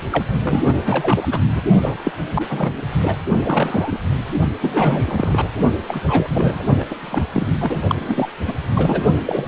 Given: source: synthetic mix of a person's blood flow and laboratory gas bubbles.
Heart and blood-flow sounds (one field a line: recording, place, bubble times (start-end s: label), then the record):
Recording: Doppler ultrasound of blood flow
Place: precordium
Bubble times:
0.10-0.23 s: bubbles
0.44-1.27 s: bubbles
1.31-1.41 s: bubbles
1.55-1.62 s: bubbles
1.81-1.97 s: bubbles
2.04-2.11 s: bubbles
2.34-2.44 s: bubbles
2.50-2.81 s: bubbles
3.02-3.15 s: bubbles
3.44-3.98 s: bubbles
4.60-5.48 s: bubbles
5.88-6.29 s: bubbles
6.33-6.63 s: bubbles
6.79-6.84 s: bubbles
6.90-6.96 s: bubbles
7.01-7.25 s: bubbles
7.33-7.47 s: bubbles
7.60-7.81 s: bubbles
7.89-7.95 s: bubbles
8.00-8.29 s: bubbles
8.47-8.53 s: bubbles
8.73-9.04 s: bubbles
9.26-9.48 s: bubbles
From the record:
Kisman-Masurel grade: 332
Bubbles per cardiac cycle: rolling drumbeat, 9 or more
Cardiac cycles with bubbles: 50 to 99%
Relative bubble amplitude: moderate (0.250 to 0.450)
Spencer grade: 3 (all of the cardiac periods contain showers or single bubble signals, but not dominating or overriding the cardiac motion signals)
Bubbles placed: only in the low amplitude regions of the cardiac cycle